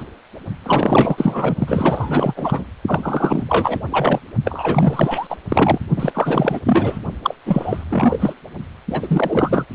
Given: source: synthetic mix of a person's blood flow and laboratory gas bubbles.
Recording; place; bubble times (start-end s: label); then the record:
Doppler ultrasound of blood flow; precordium
0.00-0.03 s: bubbles
0.66-1.55 s: bubbles
1.58-2.66 s: bubbles
2.87-3.44 s: bubbles
3.48-3.80 s: bubbles
3.90-4.19 s: bubbles
4.44-5.27 s: bubbles
5.29-5.36 s: bubbles
5.48-5.79 s: bubbles
5.96-6.59 s: bubbles
6.64-6.99 s: bubbles
7.22-7.34 s: bubbles
7.46-7.84 s: bubbles
7.89-8.34 s: bubbles
8.90-9.65 s: bubbles
From the record:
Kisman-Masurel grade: 444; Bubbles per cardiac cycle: continuous sound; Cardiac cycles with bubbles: 100%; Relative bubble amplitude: maximal (0.775 to 0.999); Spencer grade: 4 (maximum detectable bubble signal sounding continuously throughout systole and diastole of every cardiac period, and overriding the amplitude of the normal cardiac signals); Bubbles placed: only in the low amplitude regions of the cardiac cycle